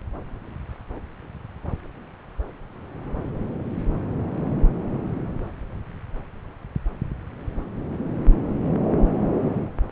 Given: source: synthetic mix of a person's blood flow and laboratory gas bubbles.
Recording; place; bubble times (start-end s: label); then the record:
Doppler ultrasound of blood flow; subclavian vein
no bubbles
From the record:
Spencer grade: 0 (complete lack of bubble signals)